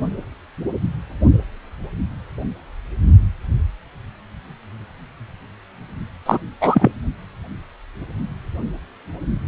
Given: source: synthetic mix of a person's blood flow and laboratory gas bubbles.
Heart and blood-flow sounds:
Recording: Doppler ultrasound of blood flow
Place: precordium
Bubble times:
6.25-6.38 s: bubbles
6.61-6.89 s: bubbles
From the record:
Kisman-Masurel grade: 213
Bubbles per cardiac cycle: several, 3 to 8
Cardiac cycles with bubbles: 1 to 10%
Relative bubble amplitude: loud (0.450 to 0.775)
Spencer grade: 1 (occasional bubble signal discernible with the cardiac motion signal, with majority of cardiac periods free of bubbles)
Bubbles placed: only in the low amplitude regions of the cardiac cycle

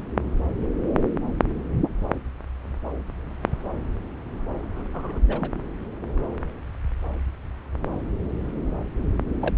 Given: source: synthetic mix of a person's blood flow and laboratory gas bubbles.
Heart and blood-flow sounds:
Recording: Doppler ultrasound of blood flow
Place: subclavian vein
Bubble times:
4.93-5.20 s: bubbles
5.28-5.52 s: bubbles
9.39-9.54 s: bubbles
From the record:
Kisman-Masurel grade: 222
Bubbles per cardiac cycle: several, 3 to 8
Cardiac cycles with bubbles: 10 to 50%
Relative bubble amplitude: moderate (0.250 to 0.450)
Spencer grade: 2 (many but less than half of the cardiac periods contain bubble signals, singularly or in groups)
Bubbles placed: anywhere in the cardiac cycle

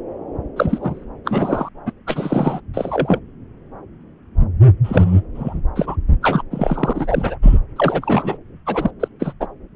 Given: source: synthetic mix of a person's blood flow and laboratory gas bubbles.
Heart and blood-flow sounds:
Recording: Doppler ultrasound of blood flow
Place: subclavian vein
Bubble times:
0.56-1.05 s: bubbles
1.25-1.69 s: bubbles
1.86-1.92 s: bubbles
2.07-2.60 s: bubbles
2.73-3.19 s: bubbles
4.83-5.21 s: bubbles
5.34-5.60 s: bubbles
5.75-5.96 s: bubbles
6.21-6.42 s: bubbles
6.50-7.36 s: bubbles
7.42-7.58 s: bubbles
7.76-8.37 s: bubbles
8.66-8.91 s: bubbles
9.00-9.08 s: bubbles
9.20-9.33 s: bubbles
9.40-9.47 s: bubbles
From the record:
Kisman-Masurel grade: 232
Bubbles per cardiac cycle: several, 3 to 8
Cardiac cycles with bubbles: 50 to 99%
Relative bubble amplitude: moderate (0.250 to 0.450)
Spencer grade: 3 (all of the cardiac periods contain showers or single bubble signals, but not dominating or overriding the cardiac motion signals)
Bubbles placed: anywhere in the cardiac cycle

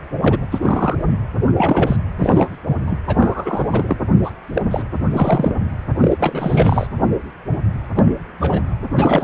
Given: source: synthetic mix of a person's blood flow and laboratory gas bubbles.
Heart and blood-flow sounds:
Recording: Doppler ultrasound of blood flow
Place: precordium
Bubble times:
0.21-0.38 s: bubbles
0.52-0.58 s: bubbles
0.61-0.96 s: bubbles
1.11-1.18 s: bubbles
1.56-1.96 s: bubbles
2.18-2.50 s: bubbles
2.86-2.97 s: bubbles
3.07-3.96 s: bubbles
4.23-4.31 s: bubbles
4.54-4.62 s: bubbles
4.71-4.83 s: bubbles
5.12-5.55 s: bubbles
6.00-6.87 s: bubbles
7.95-8.13 s: bubbles
8.40-8.62 s: bubbles
8.96-9.24 s: bubbles
From the record:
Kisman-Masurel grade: 233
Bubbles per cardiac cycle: several, 3 to 8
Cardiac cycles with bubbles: 50 to 99%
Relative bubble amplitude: loud (0.450 to 0.775)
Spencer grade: 3 (all of the cardiac periods contain showers or single bubble signals, but not dominating or overriding the cardiac motion signals)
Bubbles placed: anywhere in the cardiac cycle

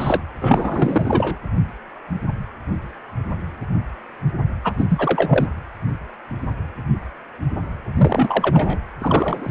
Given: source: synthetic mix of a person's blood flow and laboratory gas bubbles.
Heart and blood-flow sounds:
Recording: Doppler ultrasound of blood flow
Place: precordium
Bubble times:
0.00-0.20 s: bubbles
0.41-1.37 s: bubbles
4.64-4.73 s: bubbles
4.77-4.86 s: bubbles
4.89-5.47 s: bubbles
7.96-8.79 s: bubbles
9.01-9.51 s: bubbles
From the record:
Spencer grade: 3 (all of the cardiac periods contain showers or single bubble signals, but not dominating or overriding the cardiac motion signals)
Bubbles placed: anywhere in the cardiac cycle

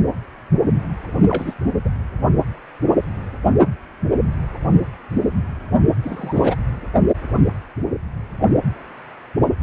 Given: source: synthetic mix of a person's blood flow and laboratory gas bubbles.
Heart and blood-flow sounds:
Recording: Doppler ultrasound of blood flow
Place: precordium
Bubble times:
1.28-1.54 s: bubbles
1.85-1.89 s: bubbles
6.04-6.56 s: bubbles
From the record:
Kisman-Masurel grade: 222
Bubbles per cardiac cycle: several, 3 to 8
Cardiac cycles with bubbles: 10 to 50%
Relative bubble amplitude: moderate (0.250 to 0.450)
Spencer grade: 2 (many but less than half of the cardiac periods contain bubble signals, singularly or in groups)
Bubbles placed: only in the low amplitude regions of the cardiac cycle

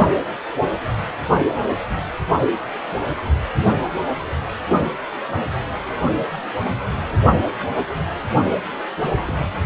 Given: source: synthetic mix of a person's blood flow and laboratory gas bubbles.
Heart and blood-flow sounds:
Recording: Doppler ultrasound of blood flow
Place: precordium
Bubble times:
9.04-9.60 s: bubbles
From the record:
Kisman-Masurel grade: 111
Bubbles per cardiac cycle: 1 to 2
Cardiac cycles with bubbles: 1 to 10%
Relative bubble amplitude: barely perceptible (0.100 to 0.250)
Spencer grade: 1 (occasional bubble signal discernible with the cardiac motion signal, with majority of cardiac periods free of bubbles)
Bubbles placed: only in the low amplitude regions of the cardiac cycle

